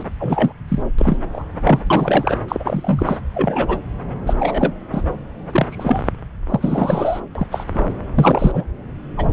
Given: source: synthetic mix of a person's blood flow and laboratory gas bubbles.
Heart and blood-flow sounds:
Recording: Doppler ultrasound of blood flow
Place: subclavian vein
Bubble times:
0.00-0.03 s: bubbles
0.20-0.53 s: bubbles
0.68-0.82 s: bubbles
0.98-1.20 s: bubbles
1.32-1.45 s: bubbles
1.60-1.80 s: bubbles
1.90-2.38 s: bubbles
2.48-3.17 s: bubbles
3.34-3.78 s: bubbles
4.26-4.33 s: bubbles
4.39-4.73 s: bubbles
4.92-5.03 s: bubbles
5.52-5.66 s: bubbles
5.70-6.10 s: bubbles
6.49-7.21 s: bubbles
7.35-7.46 s: bubbles
7.51-7.65 s: bubbles
7.75-7.83 s: bubbles
8.14-8.64 s: bubbles
9.17-9.33 s: bubbles
From the record:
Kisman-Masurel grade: 243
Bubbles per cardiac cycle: several, 3 to 8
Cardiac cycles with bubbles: 100%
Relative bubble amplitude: loud (0.450 to 0.775)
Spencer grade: 3 (all of the cardiac periods contain showers or single bubble signals, but not dominating or overriding the cardiac motion signals)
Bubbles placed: anywhere in the cardiac cycle

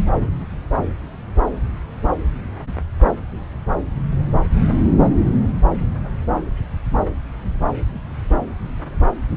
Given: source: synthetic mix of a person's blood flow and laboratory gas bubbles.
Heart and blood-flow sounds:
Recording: Doppler ultrasound of blood flow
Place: subclavian vein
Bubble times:
no bubbles
From the record:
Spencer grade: 0 (complete lack of bubble signals)

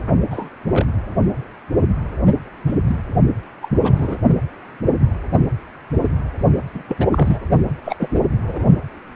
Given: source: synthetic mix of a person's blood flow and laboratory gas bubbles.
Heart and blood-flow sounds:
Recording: Doppler ultrasound of blood flow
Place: precordium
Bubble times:
0.30-0.49 s: bubbles
0.69-0.86 s: bubbles
2.67-2.74 s: bubbles
2.86-2.95 s: bubbles
3.62-3.68 s: bubbles
3.83-4.17 s: bubbles
6.74-6.83 s: bubbles
6.88-6.96 s: bubbles
6.99-7.08 s: bubbles
7.12-7.39 s: bubbles
7.85-7.95 s: bubbles
8.00-8.38 s: bubbles
8.47-8.67 s: bubbles
From the record:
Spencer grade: 2 (many but less than half of the cardiac periods contain bubble signals, singularly or in groups)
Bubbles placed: only in the low amplitude regions of the cardiac cycle

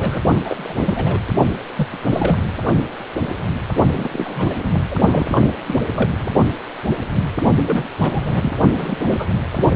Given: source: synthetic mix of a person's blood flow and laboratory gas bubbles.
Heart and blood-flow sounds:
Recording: Doppler ultrasound of blood flow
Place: precordium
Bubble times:
0.00-0.21 s: bubbles
0.44-1.20 s: bubbles
1.76-1.88 s: bubbles
1.93-1.98 s: bubbles
2.06-2.38 s: bubbles
3.94-4.08 s: bubbles
4.11-4.79 s: bubbles
4.91-4.99 s: bubbles
5.10-5.41 s: bubbles
5.67-5.81 s: bubbles
5.94-6.09 s: bubbles
6.17-6.28 s: bubbles
7.66-7.84 s: bubbles
7.98-8.62 s: bubbles
8.73-8.97 s: bubbles
9.05-9.38 s: bubbles
9.54-9.76 s: bubbles
From the record:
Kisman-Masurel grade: 332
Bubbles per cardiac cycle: rolling drumbeat, 9 or more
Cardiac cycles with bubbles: 50 to 99%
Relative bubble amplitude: moderate (0.250 to 0.450)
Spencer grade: 3 (all of the cardiac periods contain showers or single bubble signals, but not dominating or overriding the cardiac motion signals)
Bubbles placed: only in the low amplitude regions of the cardiac cycle

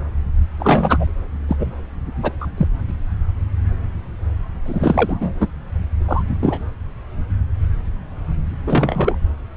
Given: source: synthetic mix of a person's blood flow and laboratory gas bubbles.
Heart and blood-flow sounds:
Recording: Doppler ultrasound of blood flow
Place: subclavian vein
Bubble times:
0.59-1.06 s: bubbles
1.48-1.56 s: bubbles
1.59-1.71 s: bubbles
2.22-2.32 s: bubbles
2.41-2.46 s: bubbles
2.57-2.67 s: bubbles
4.65-5.32 s: bubbles
5.39-5.47 s: bubbles
6.08-6.23 s: bubbles
6.27-6.67 s: bubbles
8.67-9.17 s: bubbles
From the record:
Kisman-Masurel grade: 233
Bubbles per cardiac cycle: several, 3 to 8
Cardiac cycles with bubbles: 50 to 99%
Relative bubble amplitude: loud (0.450 to 0.775)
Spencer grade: 3 (all of the cardiac periods contain showers or single bubble signals, but not dominating or overriding the cardiac motion signals)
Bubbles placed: anywhere in the cardiac cycle

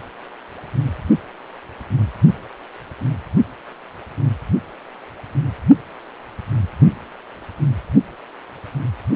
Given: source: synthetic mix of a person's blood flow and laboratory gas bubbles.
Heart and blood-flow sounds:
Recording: Doppler ultrasound of blood flow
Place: precordium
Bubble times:
no bubbles
From the record:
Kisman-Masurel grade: 000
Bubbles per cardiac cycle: 0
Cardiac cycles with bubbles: 0%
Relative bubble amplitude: no bubbles discernible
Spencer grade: 0 (complete lack of bubble signals)

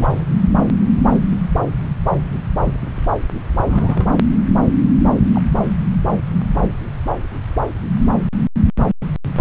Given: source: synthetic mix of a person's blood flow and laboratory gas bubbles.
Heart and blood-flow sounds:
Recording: Doppler ultrasound of blood flow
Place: subclavian vein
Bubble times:
0.00-0.22 s: bubbles
3.65-4.06 s: bubbles
5.34-5.41 s: bubbles
From the record:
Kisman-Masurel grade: 121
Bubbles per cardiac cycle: 1 to 2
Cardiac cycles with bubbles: 10 to 50%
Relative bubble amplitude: barely perceptible (0.100 to 0.250)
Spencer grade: 2 (many but less than half of the cardiac periods contain bubble signals, singularly or in groups)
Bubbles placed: anywhere in the cardiac cycle

